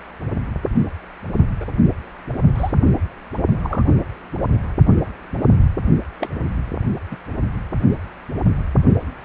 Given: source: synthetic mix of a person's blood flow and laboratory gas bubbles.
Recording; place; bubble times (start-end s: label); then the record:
Doppler ultrasound of blood flow; precordium
1.60-1.65 s: bubbles
2.54-2.73 s: bubbles
3.63-3.82 s: bubbles
6.20-6.28 s: bubbles
7.10-7.17 s: bubbles
From the record:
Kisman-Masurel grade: 122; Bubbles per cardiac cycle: 1 to 2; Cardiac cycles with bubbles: 10 to 50%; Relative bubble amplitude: moderate (0.250 to 0.450); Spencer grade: 2 (many but less than half of the cardiac periods contain bubble signals, singularly or in groups); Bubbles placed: only in the low amplitude regions of the cardiac cycle